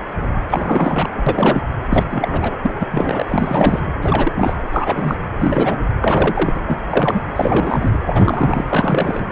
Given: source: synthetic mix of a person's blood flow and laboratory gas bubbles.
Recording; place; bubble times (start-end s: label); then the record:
Doppler ultrasound of blood flow; precordium
0.50-1.62 s: bubbles
1.90-2.06 s: bubbles
2.11-2.58 s: bubbles
2.62-2.72 s: bubbles
2.79-2.88 s: bubbles
2.91-3.25 s: bubbles
3.28-3.80 s: bubbles
4.01-4.54 s: bubbles
4.71-5.16 s: bubbles
5.39-5.77 s: bubbles
6.00-6.60 s: bubbles
6.68-6.82 s: bubbles
6.90-7.21 s: bubbles
7.36-7.99 s: bubbles
8.07-8.65 s: bubbles
8.69-9.25 s: bubbles
From the record:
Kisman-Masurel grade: 333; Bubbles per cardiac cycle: rolling drumbeat, 9 or more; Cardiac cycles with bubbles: 50 to 99%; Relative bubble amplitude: loud (0.450 to 0.775); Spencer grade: 3 (all of the cardiac periods contain showers or single bubble signals, but not dominating or overriding the cardiac motion signals); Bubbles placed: anywhere in the cardiac cycle